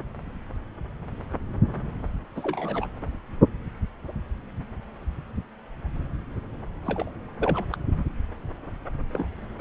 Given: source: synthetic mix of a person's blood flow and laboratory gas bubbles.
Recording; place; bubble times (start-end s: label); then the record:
Doppler ultrasound of blood flow; subclavian vein
2.35-2.86 s: bubbles
6.85-7.11 s: bubbles
7.38-7.65 s: bubbles
7.72-7.77 s: bubbles
9.13-9.29 s: bubbles
9.58-9.61 s: bubbles
From the record:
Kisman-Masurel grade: 222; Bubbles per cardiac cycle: several, 3 to 8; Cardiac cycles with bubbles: 10 to 50%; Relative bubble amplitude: moderate (0.250 to 0.450); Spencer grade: 2 (many but less than half of the cardiac periods contain bubble signals, singularly or in groups); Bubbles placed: anywhere in the cardiac cycle